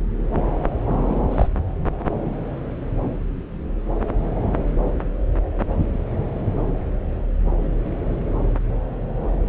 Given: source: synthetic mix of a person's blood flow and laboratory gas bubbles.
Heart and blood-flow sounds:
Doppler ultrasound of blood flow; subclavian vein
1.07-1.22 s: bubbles
1.30-1.48 s: bubbles
From the record:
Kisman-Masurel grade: 211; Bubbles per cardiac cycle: several, 3 to 8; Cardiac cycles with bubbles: 1 to 10%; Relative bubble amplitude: barely perceptible (0.100 to 0.250); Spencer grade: 1 (occasional bubble signal discernible with the cardiac motion signal, with majority of cardiac periods free of bubbles); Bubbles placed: anywhere in the cardiac cycle

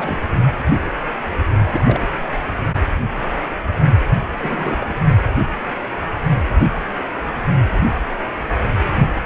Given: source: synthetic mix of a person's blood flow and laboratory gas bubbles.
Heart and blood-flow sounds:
Doppler ultrasound of blood flow; precordium
0.00-0.18 s: bubbles
1.70-2.09 s: bubbles
4.39-4.94 s: bubbles
From the record:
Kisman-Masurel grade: 221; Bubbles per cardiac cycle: several, 3 to 8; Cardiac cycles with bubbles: 10 to 50%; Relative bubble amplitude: barely perceptible (0.100 to 0.250); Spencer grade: 2 (many but less than half of the cardiac periods contain bubble signals, singularly or in groups); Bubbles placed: only in the low amplitude regions of the cardiac cycle

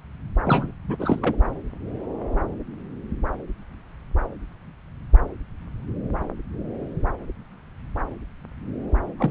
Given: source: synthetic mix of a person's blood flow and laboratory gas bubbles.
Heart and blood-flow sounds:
Doppler ultrasound of blood flow; subclavian vein
0.45-0.72 s: bubbles
0.88-0.96 s: bubbles
0.99-1.35 s: bubbles
9.18-9.31 s: bubbles
From the record:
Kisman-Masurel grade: 222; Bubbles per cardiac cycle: several, 3 to 8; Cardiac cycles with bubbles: 10 to 50%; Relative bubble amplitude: moderate (0.250 to 0.450); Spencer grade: 2 (many but less than half of the cardiac periods contain bubble signals, singularly or in groups); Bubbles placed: anywhere in the cardiac cycle

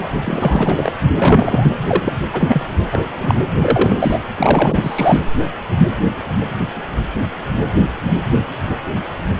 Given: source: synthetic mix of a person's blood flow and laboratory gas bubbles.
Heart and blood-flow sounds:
Doppler ultrasound of blood flow; precordium
0.00-0.05 s: bubbles
0.24-0.91 s: bubbles
1.15-1.71 s: bubbles
1.87-2.13 s: bubbles
2.33-2.68 s: bubbles
2.91-3.00 s: bubbles
3.20-3.35 s: bubbles
3.61-4.19 s: bubbles
4.37-5.22 s: bubbles
From the record:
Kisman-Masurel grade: 333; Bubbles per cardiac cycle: rolling drumbeat, 9 or more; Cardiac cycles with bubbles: 50 to 99%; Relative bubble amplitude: loud (0.450 to 0.775); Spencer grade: 3 (all of the cardiac periods contain showers or single bubble signals, but not dominating or overriding the cardiac motion signals); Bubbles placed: anywhere in the cardiac cycle

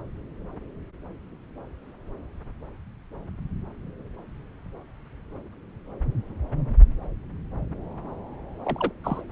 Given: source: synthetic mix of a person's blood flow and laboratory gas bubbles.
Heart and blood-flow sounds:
Doppler ultrasound of blood flow; subclavian vein
8.63-8.91 s: bubbles
9.04-9.21 s: bubbles
From the record:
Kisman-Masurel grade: 222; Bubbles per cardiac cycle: several, 3 to 8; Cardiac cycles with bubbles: 10 to 50%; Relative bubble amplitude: moderate (0.250 to 0.450); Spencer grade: 2 (many but less than half of the cardiac periods contain bubble signals, singularly or in groups); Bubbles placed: anywhere in the cardiac cycle

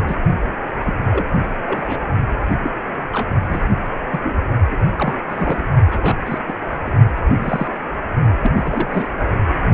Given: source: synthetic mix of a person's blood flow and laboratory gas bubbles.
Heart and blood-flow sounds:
Doppler ultrasound of blood flow; precordium
0.08-0.16 s: bubbles
0.83-0.93 s: bubbles
1.09-1.25 s: bubbles
1.66-2.01 s: bubbles
2.63-2.70 s: bubbles
3.11-3.29 s: bubbles
3.48-3.67 s: bubbles
4.11-4.20 s: bubbles
4.24-4.33 s: bubbles
4.71-4.78 s: bubbles
4.97-5.19 s: bubbles
5.29-5.62 s: bubbles
5.91-6.17 s: bubbles
6.25-6.39 s: bubbles
6.48-6.53 s: bubbles
6.86-6.91 s: bubbles
7.17-7.21 s: bubbles
7.37-7.67 s: bubbles
8.43-9.09 s: bubbles
From the record:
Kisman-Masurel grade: 242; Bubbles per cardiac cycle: several, 3 to 8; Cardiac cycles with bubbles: 100%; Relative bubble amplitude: moderate (0.250 to 0.450); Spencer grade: 3 (all of the cardiac periods contain showers or single bubble signals, but not dominating or overriding the cardiac motion signals); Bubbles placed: only in the low amplitude regions of the cardiac cycle

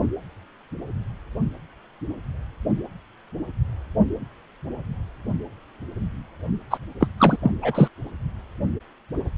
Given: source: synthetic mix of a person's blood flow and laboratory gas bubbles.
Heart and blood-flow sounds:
Doppler ultrasound of blood flow; precordium
6.71-6.78 s: bubbles
7.00-7.08 s: bubbles
7.18-7.37 s: bubbles
7.42-7.52 s: bubbles
7.62-7.88 s: bubbles
From the record:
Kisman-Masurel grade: 213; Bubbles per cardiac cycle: several, 3 to 8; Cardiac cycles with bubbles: 1 to 10%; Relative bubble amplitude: loud (0.450 to 0.775); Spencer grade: 1 (occasional bubble signal discernible with the cardiac motion signal, with majority of cardiac periods free of bubbles); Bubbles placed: only in the low amplitude regions of the cardiac cycle

